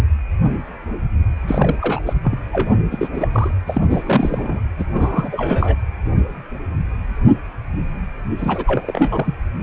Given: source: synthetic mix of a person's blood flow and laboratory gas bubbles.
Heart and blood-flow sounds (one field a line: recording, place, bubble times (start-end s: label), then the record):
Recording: Doppler ultrasound of blood flow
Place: precordium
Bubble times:
1.48-2.03 s: bubbles
2.06-2.13 s: bubbles
2.23-2.38 s: bubbles
2.52-2.79 s: bubbles
2.91-3.08 s: bubbles
3.12-3.28 s: bubbles
3.33-3.54 s: bubbles
3.67-3.85 s: bubbles
3.89-4.61 s: bubbles
4.79-4.84 s: bubbles
4.93-5.75 s: bubbles
8.38-9.34 s: bubbles
From the record:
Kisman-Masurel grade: 332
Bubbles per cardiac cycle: rolling drumbeat, 9 or more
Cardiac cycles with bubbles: 50 to 99%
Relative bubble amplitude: moderate (0.250 to 0.450)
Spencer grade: 3 (all of the cardiac periods contain showers or single bubble signals, but not dominating or overriding the cardiac motion signals)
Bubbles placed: anywhere in the cardiac cycle